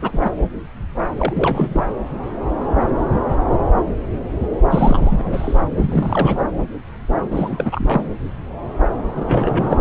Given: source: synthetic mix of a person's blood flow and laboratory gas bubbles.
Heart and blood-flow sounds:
Doppler ultrasound of blood flow; subclavian vein
0.01-0.29 s: bubbles
1.18-1.83 s: bubbles
4.69-5.61 s: bubbles
5.77-6.40 s: bubbles
7.31-8.09 s: bubbles
9.16-9.81 s: bubbles
From the record:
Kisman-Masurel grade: 332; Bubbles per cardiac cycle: rolling drumbeat, 9 or more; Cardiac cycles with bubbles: 50 to 99%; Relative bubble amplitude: moderate (0.250 to 0.450); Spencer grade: 3 (all of the cardiac periods contain showers or single bubble signals, but not dominating or overriding the cardiac motion signals); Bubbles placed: anywhere in the cardiac cycle

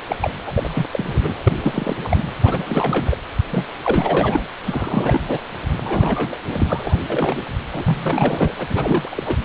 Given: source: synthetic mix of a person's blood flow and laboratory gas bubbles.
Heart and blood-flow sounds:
Doppler ultrasound of blood flow; precordium
0.00-0.02 s: bubbles
0.07-0.16 s: bubbles
0.22-0.30 s: bubbles
0.46-0.89 s: bubbles
0.92-1.20 s: bubbles
1.23-1.96 s: bubbles
2.04-2.24 s: bubbles
2.42-3.18 s: bubbles
3.50-3.67 s: bubbles
3.83-4.48 s: bubbles
4.66-5.40 s: bubbles
5.83-6.37 s: bubbles
6.48-7.00 s: bubbles
7.09-7.42 s: bubbles
7.72-8.54 s: bubbles
8.57-9.36 s: bubbles
From the record:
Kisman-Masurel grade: 342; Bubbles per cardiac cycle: rolling drumbeat, 9 or more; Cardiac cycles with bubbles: 100%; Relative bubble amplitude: moderate (0.250 to 0.450); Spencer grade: 3 (all of the cardiac periods contain showers or single bubble signals, but not dominating or overriding the cardiac motion signals); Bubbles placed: anywhere in the cardiac cycle

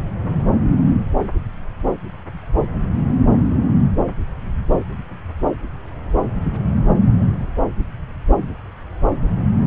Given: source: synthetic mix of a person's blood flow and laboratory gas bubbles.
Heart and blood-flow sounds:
Doppler ultrasound of blood flow; subclavian vein
no bubbles
From the record:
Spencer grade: 0 (complete lack of bubble signals)

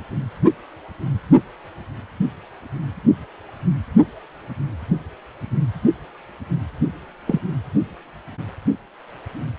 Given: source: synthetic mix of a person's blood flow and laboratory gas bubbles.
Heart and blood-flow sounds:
Doppler ultrasound of blood flow; precordium
7.27-7.41 s: bubbles
From the record:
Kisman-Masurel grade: 112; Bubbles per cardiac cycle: 1 to 2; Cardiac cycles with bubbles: 1 to 10%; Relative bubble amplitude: moderate (0.250 to 0.450); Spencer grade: 1 (occasional bubble signal discernible with the cardiac motion signal, with majority of cardiac periods free of bubbles); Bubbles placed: only in the low amplitude regions of the cardiac cycle

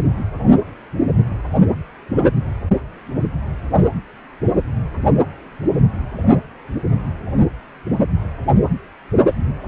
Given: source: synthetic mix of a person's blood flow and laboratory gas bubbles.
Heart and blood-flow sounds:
Doppler ultrasound of blood flow; precordium
no bubbles
From the record:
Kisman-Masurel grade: 000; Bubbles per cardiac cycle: 0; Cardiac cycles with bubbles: 0%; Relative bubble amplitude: no bubbles discernible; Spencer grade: 0 (complete lack of bubble signals)

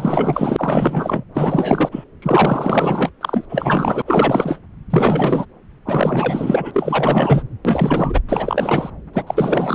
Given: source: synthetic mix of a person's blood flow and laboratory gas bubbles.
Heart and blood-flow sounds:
Doppler ultrasound of blood flow; subclavian vein
0.00-1.24 s: bubbles
1.34-2.04 s: bubbles
2.22-3.10 s: bubbles
3.21-3.45 s: bubbles
3.49-4.02 s: bubbles
4.05-4.58 s: bubbles
4.90-5.46 s: bubbles
5.85-7.44 s: bubbles
7.64-8.20 s: bubbles
8.29-8.90 s: bubbles
9.13-9.23 s: bubbles
9.27-9.75 s: bubbles
From the record:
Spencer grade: 4 (maximum detectable bubble signal sounding continuously throughout systole and diastole of every cardiac period, and overriding the amplitude of the normal cardiac signals); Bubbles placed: anywhere in the cardiac cycle

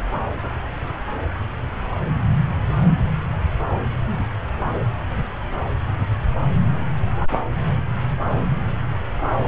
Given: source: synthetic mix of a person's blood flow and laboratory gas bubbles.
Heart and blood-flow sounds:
Doppler ultrasound of blood flow; subclavian vein
9.38-9.48 s: bubbles
From the record:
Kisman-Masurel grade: 212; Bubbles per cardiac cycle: several, 3 to 8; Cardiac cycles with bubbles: 1 to 10%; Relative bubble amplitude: moderate (0.250 to 0.450); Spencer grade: 1 (occasional bubble signal discernible with the cardiac motion signal, with majority of cardiac periods free of bubbles); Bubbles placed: anywhere in the cardiac cycle

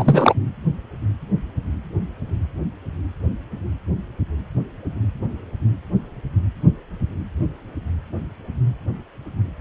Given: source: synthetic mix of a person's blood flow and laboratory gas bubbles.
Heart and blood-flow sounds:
Doppler ultrasound of blood flow; precordium
0.00-0.34 s: bubbles
From the record:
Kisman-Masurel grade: 213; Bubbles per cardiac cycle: several, 3 to 8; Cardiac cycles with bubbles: 1 to 10%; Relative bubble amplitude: loud (0.450 to 0.775); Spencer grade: 1 (occasional bubble signal discernible with the cardiac motion signal, with majority of cardiac periods free of bubbles); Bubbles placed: anywhere in the cardiac cycle

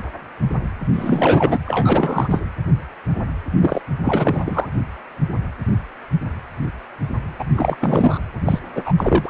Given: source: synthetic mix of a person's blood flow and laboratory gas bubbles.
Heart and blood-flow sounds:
Doppler ultrasound of blood flow; precordium
0.94-1.59 s: bubbles
1.65-2.40 s: bubbles
3.58-3.81 s: bubbles
4.04-4.68 s: bubbles
7.39-7.45 s: bubbles
7.55-7.77 s: bubbles
7.79-8.19 s: bubbles
8.45-8.59 s: bubbles
8.75-8.81 s: bubbles
8.85-8.93 s: bubbles
8.97-9.29 s: bubbles
From the record:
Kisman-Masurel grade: 333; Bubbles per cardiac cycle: rolling drumbeat, 9 or more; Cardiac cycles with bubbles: 50 to 99%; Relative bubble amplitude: loud (0.450 to 0.775); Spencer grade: 3 (all of the cardiac periods contain showers or single bubble signals, but not dominating or overriding the cardiac motion signals); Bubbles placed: anywhere in the cardiac cycle

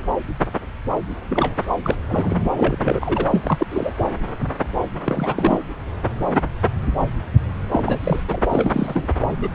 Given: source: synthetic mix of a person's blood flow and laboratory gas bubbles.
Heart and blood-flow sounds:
Doppler ultrasound of blood flow; subclavian vein
1.28-1.55 s: bubbles
1.83-1.97 s: bubbles
2.09-2.39 s: bubbles
2.45-2.51 s: bubbles
2.55-3.27 s: bubbles
3.30-3.67 s: bubbles
3.70-3.94 s: bubbles
5.01-5.61 s: bubbles
7.71-8.21 s: bubbles
8.28-8.41 s: bubbles
8.49-9.09 s: bubbles
9.21-9.29 s: bubbles
9.40-9.50 s: bubbles
From the record:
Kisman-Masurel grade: 333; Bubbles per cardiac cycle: rolling drumbeat, 9 or more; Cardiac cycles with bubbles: 50 to 99%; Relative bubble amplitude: loud (0.450 to 0.775); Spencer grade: 3 (all of the cardiac periods contain showers or single bubble signals, but not dominating or overriding the cardiac motion signals); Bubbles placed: anywhere in the cardiac cycle

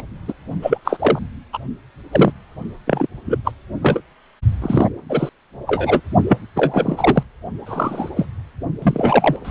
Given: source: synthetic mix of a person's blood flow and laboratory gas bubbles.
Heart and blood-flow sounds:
Doppler ultrasound of blood flow; precordium
0.00-0.02 s: bubbles
0.28-0.33 s: bubbles
0.61-0.78 s: bubbles
0.85-1.19 s: bubbles
1.53-1.58 s: bubbles
2.11-2.32 s: bubbles
2.86-3.06 s: bubbles
3.25-3.38 s: bubbles
3.44-3.52 s: bubbles
3.82-4.00 s: bubbles
4.62-4.90 s: bubbles
5.09-5.29 s: bubbles
5.67-6.00 s: bubbles
6.28-6.38 s: bubbles
6.55-7.23 s: bubbles
7.66-8.10 s: bubbles
8.15-8.27 s: bubbles
8.82-9.36 s: bubbles
9.45-9.51 s: bubbles
From the record:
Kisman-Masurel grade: 243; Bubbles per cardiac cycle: several, 3 to 8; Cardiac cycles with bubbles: 100%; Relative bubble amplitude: loud (0.450 to 0.775); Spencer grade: 3 (all of the cardiac periods contain showers or single bubble signals, but not dominating or overriding the cardiac motion signals); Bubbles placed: only in the low amplitude regions of the cardiac cycle

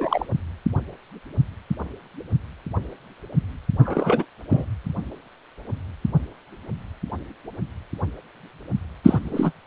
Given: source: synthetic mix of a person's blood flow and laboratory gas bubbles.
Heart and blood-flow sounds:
Doppler ultrasound of blood flow; precordium
0.00-0.26 s: bubbles
3.79-4.25 s: bubbles
4.50-4.65 s: bubbles
9.04-9.19 s: bubbles
9.24-9.51 s: bubbles
From the record:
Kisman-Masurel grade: 222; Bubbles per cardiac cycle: several, 3 to 8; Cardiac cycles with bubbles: 10 to 50%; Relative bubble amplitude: moderate (0.250 to 0.450); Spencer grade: 2 (many but less than half of the cardiac periods contain bubble signals, singularly or in groups); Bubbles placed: anywhere in the cardiac cycle

